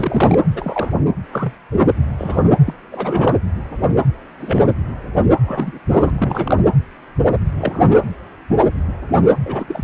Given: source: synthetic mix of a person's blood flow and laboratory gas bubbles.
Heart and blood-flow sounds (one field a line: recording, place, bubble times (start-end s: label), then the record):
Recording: Doppler ultrasound of blood flow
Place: precordium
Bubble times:
0.00-0.39 s: bubbles
0.47-0.91 s: bubbles
1.33-1.53 s: bubbles
1.72-1.81 s: bubbles
2.06-2.10 s: bubbles
2.17-2.56 s: bubbles
2.66-2.73 s: bubbles
2.92-3.38 s: bubbles
4.40-4.74 s: bubbles
5.46-5.79 s: bubbles
5.90-6.10 s: bubbles
6.15-6.61 s: bubbles
7.58-8.01 s: bubbles
9.45-9.65 s: bubbles
9.68-9.83 s: bubbles
From the record:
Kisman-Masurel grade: 232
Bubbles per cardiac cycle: several, 3 to 8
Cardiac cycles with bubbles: 50 to 99%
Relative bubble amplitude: moderate (0.250 to 0.450)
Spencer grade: 3 (all of the cardiac periods contain showers or single bubble signals, but not dominating or overriding the cardiac motion signals)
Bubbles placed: anywhere in the cardiac cycle